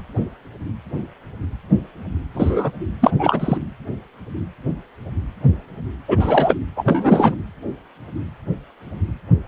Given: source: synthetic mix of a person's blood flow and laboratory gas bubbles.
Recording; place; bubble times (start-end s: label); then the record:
Doppler ultrasound of blood flow; precordium
2.34-2.72 s: bubbles
3.00-3.11 s: bubbles
3.19-3.57 s: bubbles
6.08-6.55 s: bubbles
6.75-7.36 s: bubbles
From the record:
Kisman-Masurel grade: 223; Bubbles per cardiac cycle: several, 3 to 8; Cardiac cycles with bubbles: 10 to 50%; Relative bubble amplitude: loud (0.450 to 0.775); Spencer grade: 2 (many but less than half of the cardiac periods contain bubble signals, singularly or in groups); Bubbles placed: anywhere in the cardiac cycle